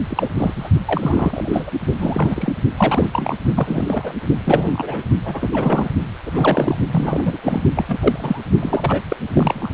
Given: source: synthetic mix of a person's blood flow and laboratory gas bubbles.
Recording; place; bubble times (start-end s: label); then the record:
Doppler ultrasound of blood flow; precordium
0.00-0.02 s: bubbles
0.10-0.31 s: bubbles
0.36-0.54 s: bubbles
0.56-0.70 s: bubbles
0.86-1.71 s: bubbles
1.91-2.52 s: bubbles
2.77-3.36 s: bubbles
3.54-4.14 s: bubbles
4.43-5.04 s: bubbles
5.25-5.89 s: bubbles
6.26-6.76 s: bubbles
6.91-7.38 s: bubbles
7.43-7.62 s: bubbles
7.75-7.85 s: bubbles
7.88-8.39 s: bubbles
8.60-9.02 s: bubbles
9.09-9.16 s: bubbles
9.34-9.69 s: bubbles
From the record:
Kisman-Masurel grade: 342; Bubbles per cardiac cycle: rolling drumbeat, 9 or more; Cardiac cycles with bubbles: 100%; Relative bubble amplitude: moderate (0.250 to 0.450); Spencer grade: 3 (all of the cardiac periods contain showers or single bubble signals, but not dominating or overriding the cardiac motion signals); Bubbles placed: only in the low amplitude regions of the cardiac cycle